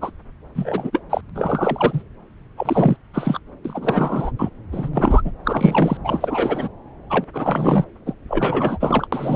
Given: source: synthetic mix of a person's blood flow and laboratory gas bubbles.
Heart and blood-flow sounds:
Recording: Doppler ultrasound of blood flow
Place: subclavian vein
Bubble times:
0.01-0.10 s: bubbles
0.55-1.02 s: bubbles
1.10-1.21 s: bubbles
1.35-2.03 s: bubbles
2.57-2.97 s: bubbles
3.13-3.40 s: bubbles
3.65-4.32 s: bubbles
4.39-4.50 s: bubbles
4.72-4.89 s: bubbles
4.93-5.32 s: bubbles
5.45-5.97 s: bubbles
6.04-6.69 s: bubbles
7.10-7.25 s: bubbles
7.33-7.85 s: bubbles
8.05-8.14 s: bubbles
8.28-9.07 s: bubbles
9.12-9.36 s: bubbles
From the record:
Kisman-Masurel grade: 343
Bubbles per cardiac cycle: rolling drumbeat, 9 or more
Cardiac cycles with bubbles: 100%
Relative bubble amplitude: loud (0.450 to 0.775)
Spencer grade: 3 (all of the cardiac periods contain showers or single bubble signals, but not dominating or overriding the cardiac motion signals)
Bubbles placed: anywhere in the cardiac cycle

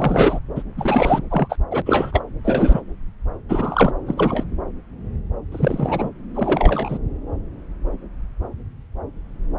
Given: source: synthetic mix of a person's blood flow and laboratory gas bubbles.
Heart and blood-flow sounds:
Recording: Doppler ultrasound of blood flow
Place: subclavian vein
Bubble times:
0.00-0.40 s: bubbles
0.56-0.62 s: bubbles
0.77-1.24 s: bubbles
1.30-1.56 s: bubbles
1.71-1.82 s: bubbles
1.86-2.23 s: bubbles
2.44-2.81 s: bubbles
3.49-3.92 s: bubbles
4.07-4.14 s: bubbles
4.17-4.44 s: bubbles
5.52-6.09 s: bubbles
6.34-6.98 s: bubbles
From the record:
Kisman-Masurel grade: 233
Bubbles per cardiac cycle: several, 3 to 8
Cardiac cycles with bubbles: 50 to 99%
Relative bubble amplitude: loud (0.450 to 0.775)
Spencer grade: 3 (all of the cardiac periods contain showers or single bubble signals, but not dominating or overriding the cardiac motion signals)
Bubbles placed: anywhere in the cardiac cycle

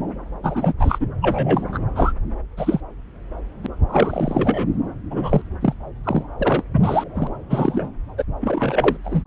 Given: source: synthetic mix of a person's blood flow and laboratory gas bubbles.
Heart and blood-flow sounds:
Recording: Doppler ultrasound of blood flow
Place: subclavian vein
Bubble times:
0.43-0.73 s: bubbles
0.79-1.07 s: bubbles
1.21-1.78 s: bubbles
1.96-2.12 s: bubbles
2.57-2.80 s: bubbles
3.63-3.67 s: bubbles
3.88-4.67 s: bubbles
5.10-5.42 s: bubbles
5.61-5.74 s: bubbles
6.04-6.23 s: bubbles
6.39-6.63 s: bubbles
6.73-7.04 s: bubbles
7.14-7.30 s: bubbles
7.50-7.89 s: bubbles
8.18-8.23 s: bubbles
8.41-8.96 s: bubbles
9.04-9.22 s: bubbles
From the record:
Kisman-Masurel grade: 232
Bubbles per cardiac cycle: several, 3 to 8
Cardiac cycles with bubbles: 50 to 99%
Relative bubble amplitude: moderate (0.250 to 0.450)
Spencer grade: 3 (all of the cardiac periods contain showers or single bubble signals, but not dominating or overriding the cardiac motion signals)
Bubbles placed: anywhere in the cardiac cycle

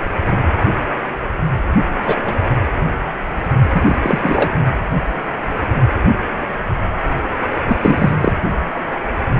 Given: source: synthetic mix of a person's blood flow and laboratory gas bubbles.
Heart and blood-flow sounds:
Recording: Doppler ultrasound of blood flow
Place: precordium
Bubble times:
2.03-2.17 s: bubbles
2.27-2.35 s: bubbles
3.68-3.81 s: bubbles
3.85-3.96 s: bubbles
4.02-4.51 s: bubbles
7.68-7.76 s: bubbles
7.81-8.33 s: bubbles
From the record:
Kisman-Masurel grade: 223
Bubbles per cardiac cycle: several, 3 to 8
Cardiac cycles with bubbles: 10 to 50%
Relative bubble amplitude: loud (0.450 to 0.775)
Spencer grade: 2 (many but less than half of the cardiac periods contain bubble signals, singularly or in groups)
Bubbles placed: anywhere in the cardiac cycle

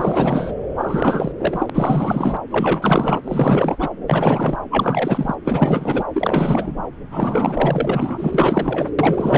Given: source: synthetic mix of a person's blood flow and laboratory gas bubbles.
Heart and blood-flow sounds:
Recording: Doppler ultrasound of blood flow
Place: subclavian vein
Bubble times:
0.00-0.55 s: bubbles
0.77-1.32 s: bubbles
1.38-1.70 s: bubbles
1.74-2.37 s: bubbles
2.51-3.21 s: bubbles
3.26-3.90 s: bubbles
4.06-4.56 s: bubbles
4.71-5.35 s: bubbles
5.45-6.04 s: bubbles
6.13-6.75 s: bubbles
7.11-8.91 s: bubbles
8.98-9.38 s: bubbles
From the record:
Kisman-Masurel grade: 444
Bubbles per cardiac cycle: continuous sound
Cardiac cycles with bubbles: 100%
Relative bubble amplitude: maximal (0.775 to 0.999)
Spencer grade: 4 (maximum detectable bubble signal sounding continuously throughout systole and diastole of every cardiac period, and overriding the amplitude of the normal cardiac signals)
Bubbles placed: anywhere in the cardiac cycle

